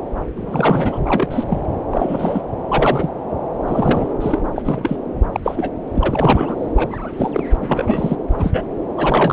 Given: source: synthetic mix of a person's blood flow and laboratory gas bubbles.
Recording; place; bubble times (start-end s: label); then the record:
Doppler ultrasound of blood flow; subclavian vein
0.36-0.99 s: bubbles
1.06-1.28 s: bubbles
1.31-1.44 s: bubbles
1.47-1.61 s: bubbles
1.91-2.42 s: bubbles
2.67-3.10 s: bubbles
3.65-4.14 s: bubbles
4.20-4.39 s: bubbles
4.56-4.62 s: bubbles
4.65-4.99 s: bubbles
5.33-5.40 s: bubbles
5.43-5.73 s: bubbles
5.94-6.56 s: bubbles
6.75-7.08 s: bubbles
7.17-7.31 s: bubbles
7.33-7.44 s: bubbles
7.54-8.16 s: bubbles
8.38-8.63 s: bubbles
8.97-9.33 s: bubbles
From the record:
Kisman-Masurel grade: 243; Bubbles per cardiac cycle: several, 3 to 8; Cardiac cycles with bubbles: 100%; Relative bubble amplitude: loud (0.450 to 0.775); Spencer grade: 3 (all of the cardiac periods contain showers or single bubble signals, but not dominating or overriding the cardiac motion signals); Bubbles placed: anywhere in the cardiac cycle